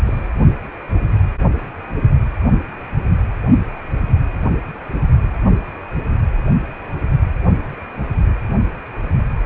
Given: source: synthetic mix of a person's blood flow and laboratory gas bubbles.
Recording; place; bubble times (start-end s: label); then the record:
Doppler ultrasound of blood flow; precordium
0.05-0.28 s: bubbles
From the record:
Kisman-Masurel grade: 111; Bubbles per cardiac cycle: 1 to 2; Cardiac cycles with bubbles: 1 to 10%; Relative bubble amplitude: barely perceptible (0.100 to 0.250); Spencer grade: 1 (occasional bubble signal discernible with the cardiac motion signal, with majority of cardiac periods free of bubbles); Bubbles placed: anywhere in the cardiac cycle